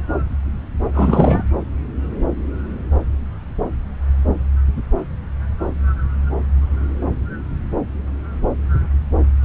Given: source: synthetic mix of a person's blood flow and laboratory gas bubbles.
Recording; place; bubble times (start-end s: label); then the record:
Doppler ultrasound of blood flow; subclavian vein
0.94-1.43 s: bubbles
From the record:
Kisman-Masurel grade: 213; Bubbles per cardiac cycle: several, 3 to 8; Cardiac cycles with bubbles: 1 to 10%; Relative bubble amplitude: loud (0.450 to 0.775); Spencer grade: 1 (occasional bubble signal discernible with the cardiac motion signal, with majority of cardiac periods free of bubbles); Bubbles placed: anywhere in the cardiac cycle